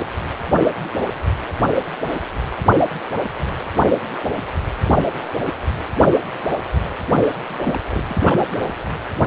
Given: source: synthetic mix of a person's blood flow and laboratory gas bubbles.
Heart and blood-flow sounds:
Doppler ultrasound of blood flow; precordium
6.84-6.88 s: bubbles
7.47-7.78 s: bubbles
7.91-8.04 s: bubbles
8.07-8.45 s: bubbles
From the record:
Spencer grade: 1 (occasional bubble signal discernible with the cardiac motion signal, with majority of cardiac periods free of bubbles); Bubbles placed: anywhere in the cardiac cycle

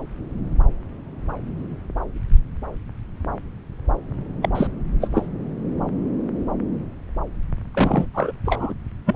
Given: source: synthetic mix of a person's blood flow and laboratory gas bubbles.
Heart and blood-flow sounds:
Doppler ultrasound of blood flow; subclavian vein
4.42-4.49 s: bubbles
4.54-4.67 s: bubbles
5.01-5.08 s: bubbles
5.15-5.26 s: bubbles
7.74-8.10 s: bubbles
8.14-8.31 s: bubbles
8.45-8.74 s: bubbles
9.06-9.15 s: bubbles
From the record:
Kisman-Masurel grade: 232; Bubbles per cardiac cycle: several, 3 to 8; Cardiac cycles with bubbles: 50 to 99%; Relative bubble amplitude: moderate (0.250 to 0.450); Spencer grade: 3 (all of the cardiac periods contain showers or single bubble signals, but not dominating or overriding the cardiac motion signals); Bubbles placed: anywhere in the cardiac cycle

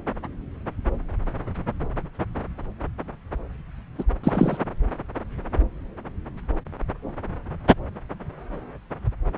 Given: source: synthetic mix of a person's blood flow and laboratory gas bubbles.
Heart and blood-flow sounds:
Doppler ultrasound of blood flow; subclavian vein
3.98-4.04 s: bubbles
4.23-4.57 s: bubbles
From the record:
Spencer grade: 1 (occasional bubble signal discernible with the cardiac motion signal, with majority of cardiac periods free of bubbles); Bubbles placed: anywhere in the cardiac cycle

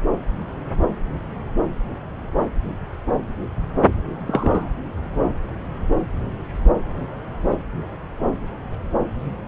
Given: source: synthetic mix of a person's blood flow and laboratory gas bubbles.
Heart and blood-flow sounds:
Doppler ultrasound of blood flow; subclavian vein
4.27-4.70 s: bubbles
From the record:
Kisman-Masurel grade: 123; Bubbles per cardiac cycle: 1 to 2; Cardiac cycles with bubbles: 10 to 50%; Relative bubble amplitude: loud (0.450 to 0.775); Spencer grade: 2 (many but less than half of the cardiac periods contain bubble signals, singularly or in groups); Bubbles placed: anywhere in the cardiac cycle

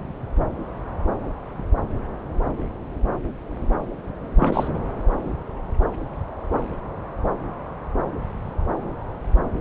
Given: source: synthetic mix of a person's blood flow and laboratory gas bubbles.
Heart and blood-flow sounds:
Doppler ultrasound of blood flow; subclavian vein
4.36-4.79 s: bubbles
From the record:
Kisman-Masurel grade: 222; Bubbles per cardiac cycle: several, 3 to 8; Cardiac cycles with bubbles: 10 to 50%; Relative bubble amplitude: moderate (0.250 to 0.450); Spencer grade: 2 (many but less than half of the cardiac periods contain bubble signals, singularly or in groups); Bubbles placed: anywhere in the cardiac cycle

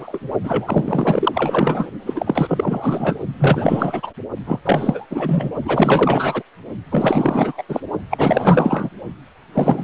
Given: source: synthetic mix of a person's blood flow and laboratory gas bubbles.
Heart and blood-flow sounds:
Doppler ultrasound of blood flow; precordium
0.00-0.20 s: bubbles
0.44-1.90 s: bubbles
2.06-3.18 s: bubbles
3.39-4.14 s: bubbles
4.47-4.60 s: bubbles
4.65-5.06 s: bubbles
5.10-5.51 s: bubbles
5.65-6.43 s: bubbles
6.91-7.63 s: bubbles
7.69-7.81 s: bubbles
8.09-8.89 s: bubbles
9.53-9.84 s: bubbles
From the record:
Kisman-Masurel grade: 444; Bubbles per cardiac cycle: continuous sound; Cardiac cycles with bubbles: 100%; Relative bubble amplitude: maximal (0.775 to 0.999); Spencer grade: 4 (maximum detectable bubble signal sounding continuously throughout systole and diastole of every cardiac period, and overriding the amplitude of the normal cardiac signals); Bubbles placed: only in the low amplitude regions of the cardiac cycle

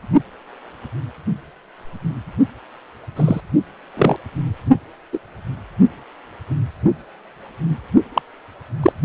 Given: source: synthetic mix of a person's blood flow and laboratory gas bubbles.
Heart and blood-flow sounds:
Doppler ultrasound of blood flow; precordium
3.16-3.40 s: bubbles
3.97-4.17 s: bubbles
5.12-5.18 s: bubbles
8.14-8.22 s: bubbles
8.82-8.93 s: bubbles
From the record:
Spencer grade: 2 (many but less than half of the cardiac periods contain bubble signals, singularly or in groups); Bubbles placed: only in the low amplitude regions of the cardiac cycle

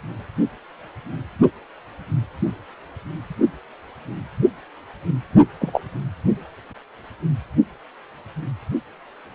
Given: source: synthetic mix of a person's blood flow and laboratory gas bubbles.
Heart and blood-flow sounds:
Doppler ultrasound of blood flow; precordium
5.61-5.81 s: bubbles
From the record:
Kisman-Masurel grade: 112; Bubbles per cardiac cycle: 1 to 2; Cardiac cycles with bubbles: 1 to 10%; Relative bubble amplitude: moderate (0.250 to 0.450); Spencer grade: 1 (occasional bubble signal discernible with the cardiac motion signal, with majority of cardiac periods free of bubbles); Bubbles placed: only in the low amplitude regions of the cardiac cycle

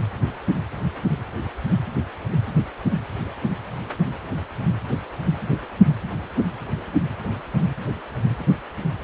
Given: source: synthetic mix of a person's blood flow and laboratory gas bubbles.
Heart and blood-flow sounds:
Doppler ultrasound of blood flow; precordium
no bubbles
From the record:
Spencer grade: 0 (complete lack of bubble signals)

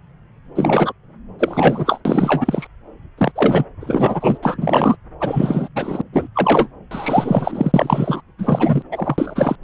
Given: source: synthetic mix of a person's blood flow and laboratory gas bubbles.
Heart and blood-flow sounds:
Doppler ultrasound of blood flow; subclavian vein
0.56-0.92 s: bubbles
1.39-2.00 s: bubbles
2.05-2.67 s: bubbles
3.17-3.31 s: bubbles
3.35-3.66 s: bubbles
3.80-4.38 s: bubbles
4.42-4.96 s: bubbles
5.20-5.68 s: bubbles
5.75-6.01 s: bubbles
6.12-6.27 s: bubbles
6.35-6.68 s: bubbles
6.91-8.21 s: bubbles
8.38-8.83 s: bubbles
8.92-9.56 s: bubbles
From the record:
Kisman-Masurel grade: 333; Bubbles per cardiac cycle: rolling drumbeat, 9 or more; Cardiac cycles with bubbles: 50 to 99%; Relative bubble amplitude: loud (0.450 to 0.775); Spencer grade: 3 (all of the cardiac periods contain showers or single bubble signals, but not dominating or overriding the cardiac motion signals); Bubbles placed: anywhere in the cardiac cycle

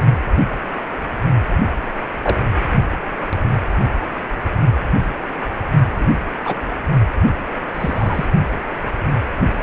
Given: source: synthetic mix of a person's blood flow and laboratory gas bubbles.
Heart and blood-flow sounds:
Doppler ultrasound of blood flow; precordium
2.23-2.36 s: bubbles
5.97-6.05 s: bubbles
6.45-6.56 s: bubbles
7.74-8.26 s: bubbles
From the record:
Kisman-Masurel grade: 122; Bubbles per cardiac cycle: 1 to 2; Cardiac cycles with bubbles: 10 to 50%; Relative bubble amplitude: moderate (0.250 to 0.450); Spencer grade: 2 (many but less than half of the cardiac periods contain bubble signals, singularly or in groups); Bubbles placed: only in the low amplitude regions of the cardiac cycle

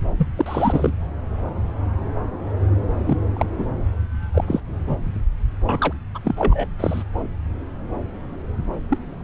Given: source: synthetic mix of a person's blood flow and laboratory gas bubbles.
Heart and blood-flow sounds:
Doppler ultrasound of blood flow; subclavian vein
0.18-0.27 s: bubbles
0.37-0.91 s: bubbles
3.06-3.17 s: bubbles
3.34-3.46 s: bubbles
3.58-3.65 s: bubbles
4.22-4.24 s: bubbles
4.34-4.44 s: bubbles
4.47-4.60 s: bubbles
4.87-4.96 s: bubbles
5.63-5.93 s: bubbles
6.14-6.19 s: bubbles
6.24-6.68 s: bubbles
6.79-7.03 s: bubbles
8.90-8.98 s: bubbles
From the record:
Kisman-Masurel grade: 232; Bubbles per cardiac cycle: several, 3 to 8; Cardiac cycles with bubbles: 50 to 99%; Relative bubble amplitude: moderate (0.250 to 0.450); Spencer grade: 3 (all of the cardiac periods contain showers or single bubble signals, but not dominating or overriding the cardiac motion signals); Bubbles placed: anywhere in the cardiac cycle

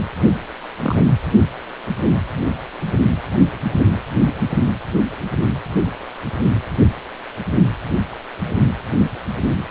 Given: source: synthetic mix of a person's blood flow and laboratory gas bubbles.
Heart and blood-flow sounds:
Doppler ultrasound of blood flow; precordium
0.82-1.04 s: bubbles
From the record:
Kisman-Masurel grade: 112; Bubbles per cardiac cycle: 1 to 2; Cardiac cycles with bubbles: 1 to 10%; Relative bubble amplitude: moderate (0.250 to 0.450); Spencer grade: 1 (occasional bubble signal discernible with the cardiac motion signal, with majority of cardiac periods free of bubbles); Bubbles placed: only in the low amplitude regions of the cardiac cycle

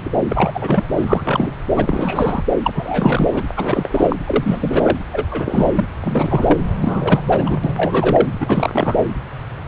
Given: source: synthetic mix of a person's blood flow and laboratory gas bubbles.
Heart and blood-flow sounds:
Doppler ultrasound of blood flow; subclavian vein
0.00-0.10 s: bubbles
0.29-0.84 s: bubbles
0.97-1.51 s: bubbles
1.76-2.44 s: bubbles
2.62-3.44 s: bubbles
3.56-4.16 s: bubbles
4.27-4.97 s: bubbles
5.10-5.85 s: bubbles
6.00-6.57 s: bubbles
6.79-7.20 s: bubbles
7.25-7.57 s: bubbles
7.63-8.28 s: bubbles
8.40-9.05 s: bubbles
From the record:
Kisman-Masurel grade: 343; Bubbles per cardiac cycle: rolling drumbeat, 9 or more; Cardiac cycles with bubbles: 100%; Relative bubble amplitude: loud (0.450 to 0.775); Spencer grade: 3 (all of the cardiac periods contain showers or single bubble signals, but not dominating or overriding the cardiac motion signals); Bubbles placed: anywhere in the cardiac cycle

